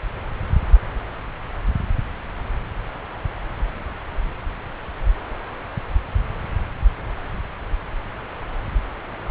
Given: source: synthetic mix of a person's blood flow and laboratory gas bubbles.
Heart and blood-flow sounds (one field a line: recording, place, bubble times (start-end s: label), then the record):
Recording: Doppler ultrasound of blood flow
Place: subclavian vein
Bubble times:
no bubbles
From the record:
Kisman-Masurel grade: 000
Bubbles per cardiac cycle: 0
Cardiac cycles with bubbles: 0%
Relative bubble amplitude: no bubbles discernible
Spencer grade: 0 (complete lack of bubble signals)